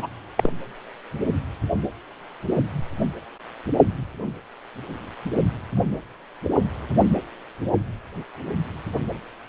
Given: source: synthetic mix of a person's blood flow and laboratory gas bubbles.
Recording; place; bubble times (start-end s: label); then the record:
Doppler ultrasound of blood flow; precordium
0.00-0.07 s: bubbles
0.37-0.51 s: bubbles
From the record:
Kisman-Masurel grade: 112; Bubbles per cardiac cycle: 1 to 2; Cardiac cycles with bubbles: 1 to 10%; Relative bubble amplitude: moderate (0.250 to 0.450); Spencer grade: 1 (occasional bubble signal discernible with the cardiac motion signal, with majority of cardiac periods free of bubbles); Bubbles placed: anywhere in the cardiac cycle